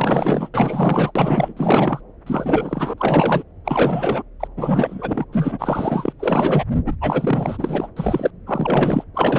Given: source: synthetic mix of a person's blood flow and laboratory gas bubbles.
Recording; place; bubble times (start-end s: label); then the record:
Doppler ultrasound of blood flow; subclavian vein
0.00-0.49 s: bubbles
0.53-1.11 s: bubbles
1.15-1.53 s: bubbles
1.57-2.01 s: bubbles
2.26-2.93 s: bubbles
2.97-3.45 s: bubbles
3.65-4.23 s: bubbles
4.40-4.48 s: bubbles
4.57-5.25 s: bubbles
5.32-6.13 s: bubbles
6.19-6.65 s: bubbles
6.86-6.96 s: bubbles
7.00-7.88 s: bubbles
7.96-8.30 s: bubbles
8.46-9.04 s: bubbles
9.14-9.39 s: bubbles
From the record:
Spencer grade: 4 (maximum detectable bubble signal sounding continuously throughout systole and diastole of every cardiac period, and overriding the amplitude of the normal cardiac signals); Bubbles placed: anywhere in the cardiac cycle